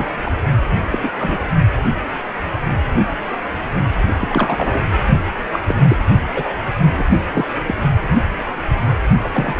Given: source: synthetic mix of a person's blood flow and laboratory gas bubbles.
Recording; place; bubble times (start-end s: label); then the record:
Doppler ultrasound of blood flow; precordium
0.00-0.07 s: bubbles
0.19-0.32 s: bubbles
0.92-1.12 s: bubbles
1.19-1.49 s: bubbles
4.20-4.80 s: bubbles
5.53-5.59 s: bubbles
5.68-5.75 s: bubbles
5.88-5.96 s: bubbles
5.99-6.04 s: bubbles
6.34-6.53 s: bubbles
6.97-7.04 s: bubbles
7.11-7.17 s: bubbles
7.33-7.47 s: bubbles
7.67-7.74 s: bubbles
9.24-9.29 s: bubbles
9.32-9.59 s: bubbles
From the record:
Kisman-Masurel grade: 232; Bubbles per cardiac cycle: several, 3 to 8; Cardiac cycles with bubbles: 50 to 99%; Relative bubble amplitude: moderate (0.250 to 0.450); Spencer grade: 3 (all of the cardiac periods contain showers or single bubble signals, but not dominating or overriding the cardiac motion signals); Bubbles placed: only in the low amplitude regions of the cardiac cycle